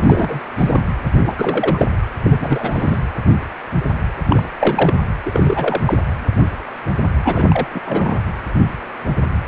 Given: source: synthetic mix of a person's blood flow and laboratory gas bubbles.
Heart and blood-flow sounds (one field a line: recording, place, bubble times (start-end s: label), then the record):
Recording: Doppler ultrasound of blood flow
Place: precordium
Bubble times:
0.00-0.40 s: bubbles
0.58-0.81 s: bubbles
1.19-1.34 s: bubbles
1.38-1.88 s: bubbles
2.23-2.98 s: bubbles
4.27-4.49 s: bubbles
4.59-4.93 s: bubbles
5.25-5.81 s: bubbles
5.85-5.97 s: bubbles
7.24-7.67 s: bubbles
7.74-7.80 s: bubbles
7.85-8.19 s: bubbles
9.44-9.48 s: bubbles
From the record:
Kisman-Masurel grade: 332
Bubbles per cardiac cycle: rolling drumbeat, 9 or more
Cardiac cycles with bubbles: 50 to 99%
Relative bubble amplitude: moderate (0.250 to 0.450)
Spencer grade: 3 (all of the cardiac periods contain showers or single bubble signals, but not dominating or overriding the cardiac motion signals)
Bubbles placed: anywhere in the cardiac cycle